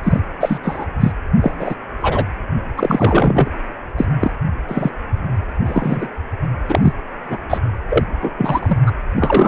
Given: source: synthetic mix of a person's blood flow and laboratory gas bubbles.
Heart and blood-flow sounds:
Doppler ultrasound of blood flow; precordium
0.03-0.20 s: bubbles
0.40-0.59 s: bubbles
0.62-0.85 s: bubbles
1.00-1.12 s: bubbles
1.42-1.76 s: bubbles
2.00-2.25 s: bubbles
2.77-3.50 s: bubbles
3.97-4.05 s: bubbles
4.20-4.32 s: bubbles
4.68-4.91 s: bubbles
5.65-6.08 s: bubbles
6.69-6.93 s: bubbles
7.29-7.38 s: bubbles
7.50-7.58 s: bubbles
7.90-8.03 s: bubbles
8.21-8.32 s: bubbles
8.38-8.78 s: bubbles
8.86-8.92 s: bubbles
9.16-9.48 s: bubbles
From the record:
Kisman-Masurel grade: 243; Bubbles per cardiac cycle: several, 3 to 8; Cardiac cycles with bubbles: 100%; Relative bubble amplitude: loud (0.450 to 0.775); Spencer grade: 3 (all of the cardiac periods contain showers or single bubble signals, but not dominating or overriding the cardiac motion signals); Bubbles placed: anywhere in the cardiac cycle

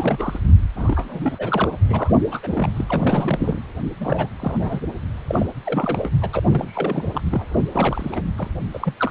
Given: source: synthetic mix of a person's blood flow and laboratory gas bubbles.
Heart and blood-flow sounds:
Doppler ultrasound of blood flow; precordium
0.00-0.39 s: bubbles
0.75-1.69 s: bubbles
1.81-2.19 s: bubbles
2.31-2.40 s: bubbles
2.42-2.48 s: bubbles
2.53-2.69 s: bubbles
2.76-2.84 s: bubbles
2.88-3.59 s: bubbles
4.00-4.29 s: bubbles
4.40-4.57 s: bubbles
4.59-4.80 s: bubbles
5.27-5.47 s: bubbles
5.66-6.10 s: bubbles
6.21-6.29 s: bubbles
6.33-6.40 s: bubbles
6.47-7.05 s: bubbles
7.15-7.21 s: bubbles
7.25-7.45 s: bubbles
7.54-7.62 s: bubbles
7.72-8.22 s: bubbles
8.38-8.49 s: bubbles
8.73-8.94 s: bubbles
8.97-9.11 s: bubbles
From the record:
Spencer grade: 3 (all of the cardiac periods contain showers or single bubble signals, but not dominating or overriding the cardiac motion signals); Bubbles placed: anywhere in the cardiac cycle

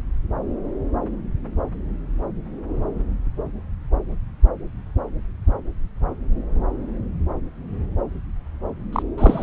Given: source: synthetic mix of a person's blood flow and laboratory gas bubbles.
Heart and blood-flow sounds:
Doppler ultrasound of blood flow; subclavian vein
8.92-9.02 s: bubbles
9.17-9.43 s: bubbles
From the record:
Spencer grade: 1 (occasional bubble signal discernible with the cardiac motion signal, with majority of cardiac periods free of bubbles); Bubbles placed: anywhere in the cardiac cycle

